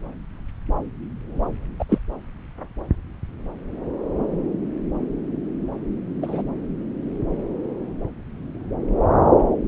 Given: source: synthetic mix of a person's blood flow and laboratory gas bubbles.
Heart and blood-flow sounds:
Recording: Doppler ultrasound of blood flow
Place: subclavian vein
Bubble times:
1.79-1.84 s: bubbles
1.89-1.98 s: bubbles
6.21-6.42 s: bubbles
From the record:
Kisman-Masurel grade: 122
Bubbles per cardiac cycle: 1 to 2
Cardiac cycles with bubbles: 10 to 50%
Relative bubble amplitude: moderate (0.250 to 0.450)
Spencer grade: 2 (many but less than half of the cardiac periods contain bubble signals, singularly or in groups)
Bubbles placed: anywhere in the cardiac cycle

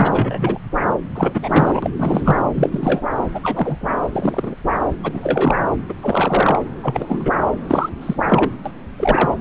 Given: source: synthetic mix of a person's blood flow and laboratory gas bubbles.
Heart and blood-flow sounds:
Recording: Doppler ultrasound of blood flow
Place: subclavian vein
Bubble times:
0.00-0.59 s: bubbles
1.15-2.43 s: bubbles
2.55-3.03 s: bubbles
3.34-3.40 s: bubbles
3.43-3.88 s: bubbles
4.12-4.55 s: bubbles
5.03-5.66 s: bubbles
5.89-5.94 s: bubbles
6.03-6.61 s: bubbles
6.83-7.32 s: bubbles
7.68-7.89 s: bubbles
8.01-8.15 s: bubbles
8.26-8.51 s: bubbles
8.65-8.72 s: bubbles
8.98-9.35 s: bubbles
From the record:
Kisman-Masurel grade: 243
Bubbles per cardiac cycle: several, 3 to 8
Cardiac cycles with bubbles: 100%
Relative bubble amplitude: loud (0.450 to 0.775)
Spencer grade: 3 (all of the cardiac periods contain showers or single bubble signals, but not dominating or overriding the cardiac motion signals)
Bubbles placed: anywhere in the cardiac cycle

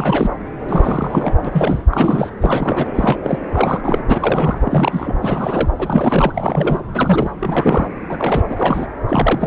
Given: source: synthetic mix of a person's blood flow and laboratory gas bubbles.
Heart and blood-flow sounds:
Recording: Doppler ultrasound of blood flow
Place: subclavian vein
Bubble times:
0.00-0.30 s: bubbles
0.62-1.33 s: bubbles
1.45-1.83 s: bubbles
1.90-2.30 s: bubbles
2.41-2.87 s: bubbles
2.95-3.19 s: bubbles
3.23-3.39 s: bubbles
3.52-4.03 s: bubbles
4.07-4.58 s: bubbles
4.64-5.17 s: bubbles
5.21-5.69 s: bubbles
5.78-6.80 s: bubbles
6.92-7.30 s: bubbles
7.39-7.88 s: bubbles
8.09-8.42 s: bubbles
8.49-8.88 s: bubbles
9.07-9.47 s: bubbles
From the record:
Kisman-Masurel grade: 343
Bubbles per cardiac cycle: rolling drumbeat, 9 or more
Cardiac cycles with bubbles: 100%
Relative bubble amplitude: loud (0.450 to 0.775)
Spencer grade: 3 (all of the cardiac periods contain showers or single bubble signals, but not dominating or overriding the cardiac motion signals)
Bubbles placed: anywhere in the cardiac cycle

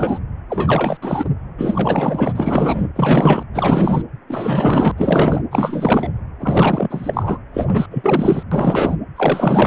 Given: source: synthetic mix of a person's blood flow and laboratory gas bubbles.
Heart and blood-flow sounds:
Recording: Doppler ultrasound of blood flow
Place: precordium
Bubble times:
0.00-0.19 s: bubbles
0.49-0.97 s: bubbles
1.02-1.29 s: bubbles
1.57-2.85 s: bubbles
2.96-3.44 s: bubbles
3.54-4.02 s: bubbles
4.28-4.92 s: bubbles
4.97-5.42 s: bubbles
5.51-6.12 s: bubbles
6.40-7.38 s: bubbles
7.54-7.86 s: bubbles
7.91-8.43 s: bubbles
8.52-8.97 s: bubbles
9.16-9.67 s: bubbles
From the record:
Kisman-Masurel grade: 444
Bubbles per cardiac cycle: continuous sound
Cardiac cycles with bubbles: 100%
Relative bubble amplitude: maximal (0.775 to 0.999)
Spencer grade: 4 (maximum detectable bubble signal sounding continuously throughout systole and diastole of every cardiac period, and overriding the amplitude of the normal cardiac signals)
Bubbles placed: anywhere in the cardiac cycle

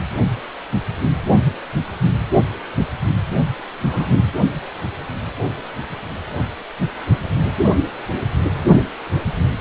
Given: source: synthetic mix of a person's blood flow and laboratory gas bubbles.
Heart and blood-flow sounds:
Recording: Doppler ultrasound of blood flow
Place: precordium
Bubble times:
3.82-4.30 s: bubbles
From the record:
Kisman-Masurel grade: 112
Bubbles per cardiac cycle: 1 to 2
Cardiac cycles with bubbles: 1 to 10%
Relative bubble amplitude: moderate (0.250 to 0.450)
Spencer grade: 1 (occasional bubble signal discernible with the cardiac motion signal, with majority of cardiac periods free of bubbles)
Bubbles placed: only in the low amplitude regions of the cardiac cycle

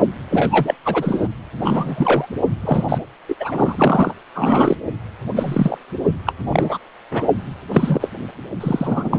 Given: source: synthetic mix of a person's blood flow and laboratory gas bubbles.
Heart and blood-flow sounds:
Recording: Doppler ultrasound of blood flow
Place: precordium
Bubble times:
0.30-0.75 s: bubbles
0.84-1.28 s: bubbles
1.62-2.27 s: bubbles
2.60-2.85 s: bubbles
2.89-2.98 s: bubbles
3.28-3.35 s: bubbles
3.40-3.75 s: bubbles
3.78-4.13 s: bubbles
4.34-4.76 s: bubbles
5.36-5.77 s: bubbles
6.26-6.33 s: bubbles
6.50-6.79 s: bubbles
7.11-7.26 s: bubbles
7.68-8.11 s: bubbles
8.60-9.19 s: bubbles
From the record:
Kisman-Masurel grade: 243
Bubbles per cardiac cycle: several, 3 to 8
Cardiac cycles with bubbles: 100%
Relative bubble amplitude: loud (0.450 to 0.775)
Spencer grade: 3 (all of the cardiac periods contain showers or single bubble signals, but not dominating or overriding the cardiac motion signals)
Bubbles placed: anywhere in the cardiac cycle

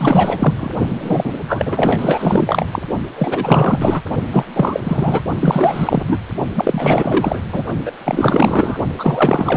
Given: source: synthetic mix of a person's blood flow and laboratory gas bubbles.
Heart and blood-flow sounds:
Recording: Doppler ultrasound of blood flow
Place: precordium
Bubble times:
0.00-0.69 s: bubbles
0.89-1.34 s: bubbles
1.48-2.66 s: bubbles
2.72-2.82 s: bubbles
3.18-4.02 s: bubbles
4.31-4.44 s: bubbles
4.55-5.23 s: bubbles
5.40-6.17 s: bubbles
6.55-7.40 s: bubbles
7.51-7.63 s: bubbles
7.85-7.91 s: bubbles
8.05-8.79 s: bubbles
8.97-9.57 s: bubbles
From the record:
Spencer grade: 4 (maximum detectable bubble signal sounding continuously throughout systole and diastole of every cardiac period, and overriding the amplitude of the normal cardiac signals)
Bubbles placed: only in the low amplitude regions of the cardiac cycle

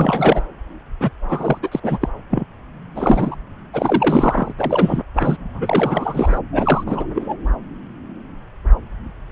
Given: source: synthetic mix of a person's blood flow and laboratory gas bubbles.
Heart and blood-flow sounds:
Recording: Doppler ultrasound of blood flow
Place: subclavian vein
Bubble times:
0.00-0.44 s: bubbles
1.00-1.10 s: bubbles
1.25-1.59 s: bubbles
1.63-1.69 s: bubbles
1.72-1.80 s: bubbles
1.83-1.99 s: bubbles
2.01-2.09 s: bubbles
2.30-2.45 s: bubbles
2.95-3.36 s: bubbles
3.73-4.53 s: bubbles
4.58-5.02 s: bubbles
5.16-5.37 s: bubbles
5.54-6.39 s: bubbles
6.53-6.83 s: bubbles
6.86-7.07 s: bubbles
7.15-7.36 s: bubbles
From the record:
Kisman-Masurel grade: 333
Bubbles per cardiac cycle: rolling drumbeat, 9 or more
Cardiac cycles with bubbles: 50 to 99%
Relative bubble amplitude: loud (0.450 to 0.775)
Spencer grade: 3 (all of the cardiac periods contain showers or single bubble signals, but not dominating or overriding the cardiac motion signals)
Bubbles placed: anywhere in the cardiac cycle

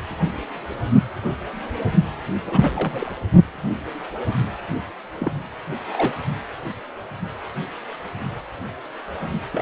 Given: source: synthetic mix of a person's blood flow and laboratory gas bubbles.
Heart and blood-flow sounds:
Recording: Doppler ultrasound of blood flow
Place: precordium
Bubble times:
2.44-3.12 s: bubbles
5.20-5.41 s: bubbles
5.93-6.15 s: bubbles
9.53-9.62 s: bubbles
From the record:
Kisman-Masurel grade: 221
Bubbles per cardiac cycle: several, 3 to 8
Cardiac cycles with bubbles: 10 to 50%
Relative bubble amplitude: barely perceptible (0.100 to 0.250)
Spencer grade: 2 (many but less than half of the cardiac periods contain bubble signals, singularly or in groups)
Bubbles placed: only in the low amplitude regions of the cardiac cycle

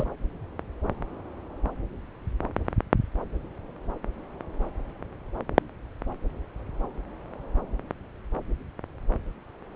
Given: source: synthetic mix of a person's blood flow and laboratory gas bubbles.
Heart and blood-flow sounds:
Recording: Doppler ultrasound of blood flow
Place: subclavian vein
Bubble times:
0.00-0.04 s: bubbles
From the record:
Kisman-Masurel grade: 213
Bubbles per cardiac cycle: several, 3 to 8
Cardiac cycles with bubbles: 1 to 10%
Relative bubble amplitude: loud (0.450 to 0.775)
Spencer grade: 1 (occasional bubble signal discernible with the cardiac motion signal, with majority of cardiac periods free of bubbles)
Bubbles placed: anywhere in the cardiac cycle

